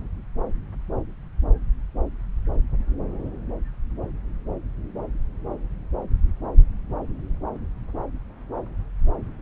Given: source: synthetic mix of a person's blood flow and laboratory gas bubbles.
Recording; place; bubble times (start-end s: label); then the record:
Doppler ultrasound of blood flow; subclavian vein
no bubbles
From the record:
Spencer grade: 0 (complete lack of bubble signals)